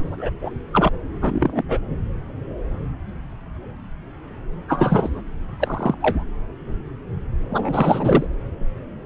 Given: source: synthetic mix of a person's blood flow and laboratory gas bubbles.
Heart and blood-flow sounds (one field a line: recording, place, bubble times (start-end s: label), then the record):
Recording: Doppler ultrasound of blood flow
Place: subclavian vein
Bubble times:
0.00-0.30 s: bubbles
0.41-0.50 s: bubbles
0.73-0.89 s: bubbles
1.22-1.63 s: bubbles
1.69-1.79 s: bubbles
4.68-5.22 s: bubbles
5.60-5.95 s: bubbles
6.00-6.25 s: bubbles
7.50-8.26 s: bubbles
From the record:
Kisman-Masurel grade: 232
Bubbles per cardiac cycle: several, 3 to 8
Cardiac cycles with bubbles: 50 to 99%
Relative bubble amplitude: moderate (0.250 to 0.450)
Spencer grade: 3 (all of the cardiac periods contain showers or single bubble signals, but not dominating or overriding the cardiac motion signals)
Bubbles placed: anywhere in the cardiac cycle